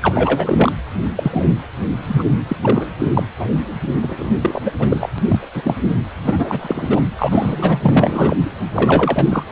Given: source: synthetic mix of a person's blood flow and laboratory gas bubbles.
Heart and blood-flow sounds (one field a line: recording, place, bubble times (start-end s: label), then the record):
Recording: Doppler ultrasound of blood flow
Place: precordium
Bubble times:
0.01-0.72 s: bubbles
1.16-1.46 s: bubbles
2.02-2.23 s: bubbles
2.48-2.56 s: bubbles
2.62-2.85 s: bubbles
2.99-3.23 s: bubbles
3.39-3.65 s: bubbles
4.02-4.30 s: bubbles
4.41-4.62 s: bubbles
4.65-4.71 s: bubbles
4.79-5.09 s: bubbles
5.18-5.23 s: bubbles
5.29-5.48 s: bubbles
5.53-5.75 s: bubbles
6.25-7.01 s: bubbles
7.17-8.37 s: bubbles
8.72-9.43 s: bubbles
From the record:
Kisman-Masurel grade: 243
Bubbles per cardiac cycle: several, 3 to 8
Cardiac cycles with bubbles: 100%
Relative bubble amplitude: loud (0.450 to 0.775)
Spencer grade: 3 (all of the cardiac periods contain showers or single bubble signals, but not dominating or overriding the cardiac motion signals)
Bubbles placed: anywhere in the cardiac cycle